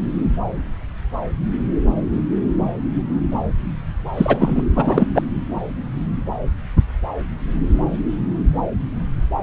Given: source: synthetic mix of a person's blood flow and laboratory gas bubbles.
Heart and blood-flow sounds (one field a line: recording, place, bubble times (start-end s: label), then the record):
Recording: Doppler ultrasound of blood flow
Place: subclavian vein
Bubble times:
4.17-4.62 s: bubbles
4.75-5.07 s: bubbles
5.14-5.22 s: bubbles
From the record:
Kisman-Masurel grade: 213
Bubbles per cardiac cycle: several, 3 to 8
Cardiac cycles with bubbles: 1 to 10%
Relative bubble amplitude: loud (0.450 to 0.775)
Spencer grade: 1 (occasional bubble signal discernible with the cardiac motion signal, with majority of cardiac periods free of bubbles)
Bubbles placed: anywhere in the cardiac cycle